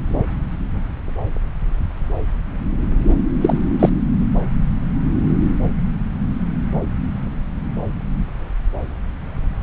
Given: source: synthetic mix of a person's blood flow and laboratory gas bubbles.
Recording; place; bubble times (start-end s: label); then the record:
Doppler ultrasound of blood flow; subclavian vein
3.08-3.14 s: bubbles
3.41-3.58 s: bubbles
3.79-3.89 s: bubbles
From the record:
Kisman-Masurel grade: 213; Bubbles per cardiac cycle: several, 3 to 8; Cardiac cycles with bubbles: 1 to 10%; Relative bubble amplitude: loud (0.450 to 0.775); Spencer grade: 1 (occasional bubble signal discernible with the cardiac motion signal, with majority of cardiac periods free of bubbles); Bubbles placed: anywhere in the cardiac cycle